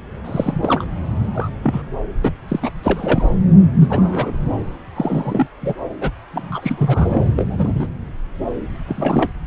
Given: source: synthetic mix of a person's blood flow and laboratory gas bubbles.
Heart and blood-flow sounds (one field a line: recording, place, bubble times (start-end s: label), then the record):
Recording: Doppler ultrasound of blood flow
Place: subclavian vein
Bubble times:
0.24-0.84 s: bubbles
1.34-1.49 s: bubbles
1.63-1.85 s: bubbles
2.24-2.31 s: bubbles
2.48-2.60 s: bubbles
2.62-2.71 s: bubbles
2.83-3.30 s: bubbles
3.81-3.87 s: bubbles
3.89-4.37 s: bubbles
4.94-5.47 s: bubbles
5.62-5.75 s: bubbles
6.01-6.10 s: bubbles
6.33-7.25 s: bubbles
7.35-7.88 s: bubbles
8.87-9.32 s: bubbles
From the record:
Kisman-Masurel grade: 232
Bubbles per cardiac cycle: several, 3 to 8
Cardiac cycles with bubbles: 50 to 99%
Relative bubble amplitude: moderate (0.250 to 0.450)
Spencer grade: 3 (all of the cardiac periods contain showers or single bubble signals, but not dominating or overriding the cardiac motion signals)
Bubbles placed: anywhere in the cardiac cycle